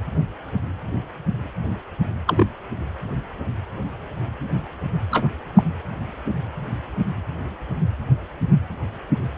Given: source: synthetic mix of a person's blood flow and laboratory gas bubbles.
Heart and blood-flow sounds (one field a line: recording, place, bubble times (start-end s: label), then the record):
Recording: Doppler ultrasound of blood flow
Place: precordium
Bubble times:
2.27-2.46 s: bubbles
5.11-5.28 s: bubbles
5.56-5.64 s: bubbles
From the record:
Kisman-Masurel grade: 122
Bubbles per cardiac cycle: 1 to 2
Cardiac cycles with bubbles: 10 to 50%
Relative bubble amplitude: moderate (0.250 to 0.450)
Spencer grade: 2 (many but less than half of the cardiac periods contain bubble signals, singularly or in groups)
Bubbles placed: anywhere in the cardiac cycle